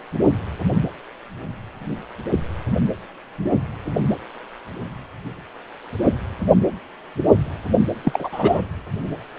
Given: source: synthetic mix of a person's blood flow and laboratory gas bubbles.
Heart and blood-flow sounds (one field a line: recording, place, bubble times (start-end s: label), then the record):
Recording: Doppler ultrasound of blood flow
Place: precordium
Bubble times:
8.03-8.29 s: bubbles
8.31-8.69 s: bubbles
From the record:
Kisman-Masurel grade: 213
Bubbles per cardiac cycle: several, 3 to 8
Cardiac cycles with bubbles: 1 to 10%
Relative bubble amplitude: loud (0.450 to 0.775)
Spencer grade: 1 (occasional bubble signal discernible with the cardiac motion signal, with majority of cardiac periods free of bubbles)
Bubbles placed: anywhere in the cardiac cycle